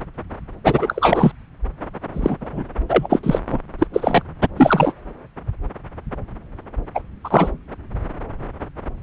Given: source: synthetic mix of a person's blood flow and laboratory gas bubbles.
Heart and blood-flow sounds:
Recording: Doppler ultrasound of blood flow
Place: subclavian vein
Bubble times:
0.64-1.32 s: bubbles
2.13-2.37 s: bubbles
2.40-2.63 s: bubbles
2.89-3.21 s: bubbles
3.23-3.39 s: bubbles
3.48-3.58 s: bubbles
3.79-3.87 s: bubbles
3.93-4.22 s: bubbles
4.57-4.92 s: bubbles
6.95-7.00 s: bubbles
7.24-7.50 s: bubbles
From the record:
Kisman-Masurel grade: 233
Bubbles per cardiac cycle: several, 3 to 8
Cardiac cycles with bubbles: 50 to 99%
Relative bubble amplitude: loud (0.450 to 0.775)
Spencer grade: 3 (all of the cardiac periods contain showers or single bubble signals, but not dominating or overriding the cardiac motion signals)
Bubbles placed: anywhere in the cardiac cycle

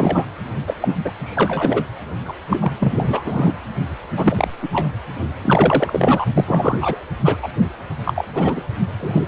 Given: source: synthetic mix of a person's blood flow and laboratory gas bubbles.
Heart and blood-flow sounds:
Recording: Doppler ultrasound of blood flow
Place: precordium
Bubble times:
0.00-0.26 s: bubbles
0.67-0.74 s: bubbles
0.81-0.89 s: bubbles
1.04-1.11 s: bubbles
1.24-1.84 s: bubbles
2.25-2.33 s: bubbles
2.49-2.72 s: bubbles
2.79-3.54 s: bubbles
4.17-4.48 s: bubbles
4.62-4.68 s: bubbles
4.71-4.97 s: bubbles
5.43-6.25 s: bubbles
6.37-6.96 s: bubbles
7.24-7.37 s: bubbles
7.42-7.49 s: bubbles
8.05-8.25 s: bubbles
8.36-8.62 s: bubbles
9.00-9.22 s: bubbles
From the record:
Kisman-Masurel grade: 243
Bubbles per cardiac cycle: several, 3 to 8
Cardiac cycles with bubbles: 100%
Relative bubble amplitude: loud (0.450 to 0.775)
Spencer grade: 3 (all of the cardiac periods contain showers or single bubble signals, but not dominating or overriding the cardiac motion signals)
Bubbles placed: anywhere in the cardiac cycle

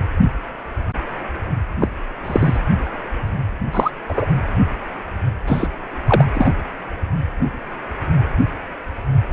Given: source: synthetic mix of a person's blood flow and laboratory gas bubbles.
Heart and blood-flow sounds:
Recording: Doppler ultrasound of blood flow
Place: precordium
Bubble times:
1.80-1.89 s: bubbles
2.25-2.60 s: bubbles
3.72-3.91 s: bubbles
4.08-4.25 s: bubbles
5.47-5.68 s: bubbles
6.07-6.25 s: bubbles
6.34-6.55 s: bubbles
From the record:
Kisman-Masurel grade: 123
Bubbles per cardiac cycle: 1 to 2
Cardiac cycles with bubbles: 10 to 50%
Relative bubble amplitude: loud (0.450 to 0.775)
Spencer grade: 2 (many but less than half of the cardiac periods contain bubble signals, singularly or in groups)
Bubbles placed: anywhere in the cardiac cycle

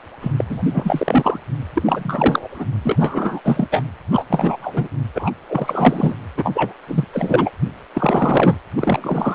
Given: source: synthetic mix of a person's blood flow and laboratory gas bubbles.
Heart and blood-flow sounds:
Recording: Doppler ultrasound of blood flow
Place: precordium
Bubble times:
0.20-0.32 s: bubbles
0.36-0.44 s: bubbles
0.49-1.39 s: bubbles
1.75-2.47 s: bubbles
2.50-2.67 s: bubbles
2.83-3.40 s: bubbles
3.44-3.67 s: bubbles
3.71-3.83 s: bubbles
4.12-4.24 s: bubbles
4.29-4.88 s: bubbles
5.14-5.30 s: bubbles
5.45-6.14 s: bubbles
6.37-6.73 s: bubbles
6.87-7.05 s: bubbles
7.13-7.50 s: bubbles
7.93-8.57 s: bubbles
8.75-9.35 s: bubbles
From the record:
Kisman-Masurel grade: 343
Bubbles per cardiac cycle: rolling drumbeat, 9 or more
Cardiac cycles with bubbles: 100%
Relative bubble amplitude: loud (0.450 to 0.775)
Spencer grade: 3 (all of the cardiac periods contain showers or single bubble signals, but not dominating or overriding the cardiac motion signals)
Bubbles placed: anywhere in the cardiac cycle

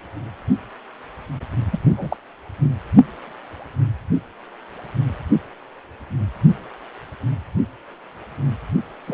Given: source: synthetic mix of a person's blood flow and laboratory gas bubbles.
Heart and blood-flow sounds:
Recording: Doppler ultrasound of blood flow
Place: precordium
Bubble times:
1.71-1.79 s: bubbles
1.96-2.17 s: bubbles
9.04-9.14 s: bubbles
From the record:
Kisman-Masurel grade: 222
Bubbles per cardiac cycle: several, 3 to 8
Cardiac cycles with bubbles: 10 to 50%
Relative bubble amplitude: moderate (0.250 to 0.450)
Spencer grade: 2 (many but less than half of the cardiac periods contain bubble signals, singularly or in groups)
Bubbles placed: only in the low amplitude regions of the cardiac cycle

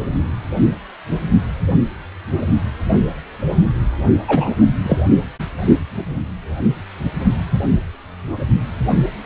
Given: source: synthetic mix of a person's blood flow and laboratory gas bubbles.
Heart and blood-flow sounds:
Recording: Doppler ultrasound of blood flow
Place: precordium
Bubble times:
4.28-4.54 s: bubbles
4.83-4.98 s: bubbles
From the record:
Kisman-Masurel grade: 213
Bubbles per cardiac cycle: several, 3 to 8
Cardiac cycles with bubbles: 1 to 10%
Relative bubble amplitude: loud (0.450 to 0.775)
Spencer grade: 1 (occasional bubble signal discernible with the cardiac motion signal, with majority of cardiac periods free of bubbles)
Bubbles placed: only in the low amplitude regions of the cardiac cycle

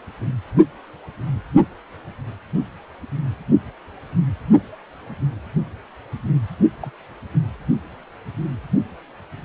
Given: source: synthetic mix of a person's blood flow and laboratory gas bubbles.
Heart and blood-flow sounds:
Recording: Doppler ultrasound of blood flow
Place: precordium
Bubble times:
6.82-6.91 s: bubbles
From the record:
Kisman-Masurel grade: 111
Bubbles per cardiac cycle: 1 to 2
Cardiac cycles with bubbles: 1 to 10%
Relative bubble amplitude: barely perceptible (0.100 to 0.250)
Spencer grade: 1 (occasional bubble signal discernible with the cardiac motion signal, with majority of cardiac periods free of bubbles)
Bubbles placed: only in the low amplitude regions of the cardiac cycle

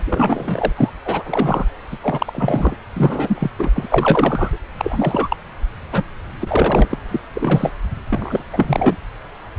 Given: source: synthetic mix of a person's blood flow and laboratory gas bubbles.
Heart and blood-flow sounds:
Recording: Doppler ultrasound of blood flow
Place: subclavian vein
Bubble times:
0.06-0.72 s: bubbles
0.76-0.90 s: bubbles
1.04-1.66 s: bubbles
1.91-1.98 s: bubbles
2.01-2.76 s: bubbles
2.94-3.50 s: bubbles
3.58-3.71 s: bubbles
3.74-4.58 s: bubbles
4.77-5.37 s: bubbles
5.92-6.06 s: bubbles
6.41-6.99 s: bubbles
7.11-7.21 s: bubbles
7.33-7.71 s: bubbles
8.09-8.43 s: bubbles
8.52-8.96 s: bubbles
From the record:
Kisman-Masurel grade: 333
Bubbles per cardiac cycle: rolling drumbeat, 9 or more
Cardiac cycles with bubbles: 50 to 99%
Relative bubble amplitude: loud (0.450 to 0.775)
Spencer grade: 3 (all of the cardiac periods contain showers or single bubble signals, but not dominating or overriding the cardiac motion signals)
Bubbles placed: anywhere in the cardiac cycle

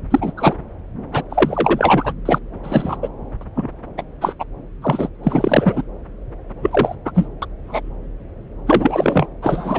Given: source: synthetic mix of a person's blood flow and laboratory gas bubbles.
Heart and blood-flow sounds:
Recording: Doppler ultrasound of blood flow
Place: subclavian vein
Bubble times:
0.10-0.32 s: bubbles
0.37-0.56 s: bubbles
1.13-1.23 s: bubbles
1.30-2.12 s: bubbles
2.25-2.38 s: bubbles
2.63-2.97 s: bubbles
3.02-3.08 s: bubbles
3.41-3.44 s: bubbles
3.55-3.69 s: bubbles
3.97-4.03 s: bubbles
4.21-4.34 s: bubbles
4.39-4.43 s: bubbles
4.81-5.09 s: bubbles
5.23-5.83 s: bubbles
6.62-6.96 s: bubbles
7.05-7.12 s: bubbles
7.14-7.26 s: bubbles
7.42-7.46 s: bubbles
7.67-7.91 s: bubbles
8.67-9.27 s: bubbles
9.42-9.78 s: bubbles
From the record:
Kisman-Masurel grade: 233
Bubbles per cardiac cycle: several, 3 to 8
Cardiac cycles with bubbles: 50 to 99%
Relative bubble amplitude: loud (0.450 to 0.775)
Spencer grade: 3 (all of the cardiac periods contain showers or single bubble signals, but not dominating or overriding the cardiac motion signals)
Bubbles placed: anywhere in the cardiac cycle

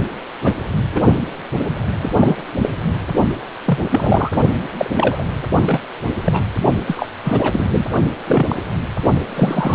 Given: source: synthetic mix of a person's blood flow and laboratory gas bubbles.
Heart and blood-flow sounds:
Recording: Doppler ultrasound of blood flow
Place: precordium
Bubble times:
0.44-0.54 s: bubbles
0.91-1.00 s: bubbles
2.01-2.14 s: bubbles
2.17-2.45 s: bubbles
2.62-2.69 s: bubbles
3.65-3.78 s: bubbles
3.91-4.32 s: bubbles
4.78-5.24 s: bubbles
5.66-5.81 s: bubbles
6.21-6.43 s: bubbles
6.87-7.07 s: bubbles
7.24-7.86 s: bubbles
8.26-8.55 s: bubbles
9.35-9.75 s: bubbles
From the record:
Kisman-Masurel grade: 242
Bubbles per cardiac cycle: several, 3 to 8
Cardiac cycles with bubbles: 100%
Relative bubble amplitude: moderate (0.250 to 0.450)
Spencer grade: 3 (all of the cardiac periods contain showers or single bubble signals, but not dominating or overriding the cardiac motion signals)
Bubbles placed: only in the low amplitude regions of the cardiac cycle

